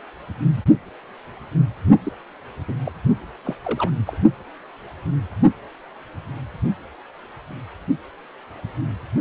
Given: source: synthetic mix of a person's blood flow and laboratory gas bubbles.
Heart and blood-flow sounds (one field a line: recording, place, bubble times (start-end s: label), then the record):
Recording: Doppler ultrasound of blood flow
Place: precordium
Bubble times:
2.04-2.12 s: bubbles
2.68-2.74 s: bubbles
2.85-2.92 s: bubbles
3.45-3.56 s: bubbles
3.62-3.91 s: bubbles
4.06-4.19 s: bubbles
From the record:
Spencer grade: 1 (occasional bubble signal discernible with the cardiac motion signal, with majority of cardiac periods free of bubbles)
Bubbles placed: only in the low amplitude regions of the cardiac cycle